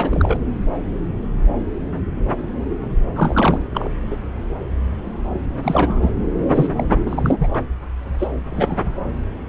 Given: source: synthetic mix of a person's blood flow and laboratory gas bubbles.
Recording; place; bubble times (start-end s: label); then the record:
Doppler ultrasound of blood flow; subclavian vein
0.00-0.39 s: bubbles
3.16-3.59 s: bubbles
3.75-3.89 s: bubbles
4.10-4.17 s: bubbles
5.62-6.13 s: bubbles
6.55-6.67 s: bubbles
6.75-6.84 s: bubbles
7.05-7.35 s: bubbles
7.39-7.48 s: bubbles
7.53-7.57 s: bubbles
8.19-8.28 s: bubbles
8.50-8.79 s: bubbles
From the record:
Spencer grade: 3 (all of the cardiac periods contain showers or single bubble signals, but not dominating or overriding the cardiac motion signals); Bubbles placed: anywhere in the cardiac cycle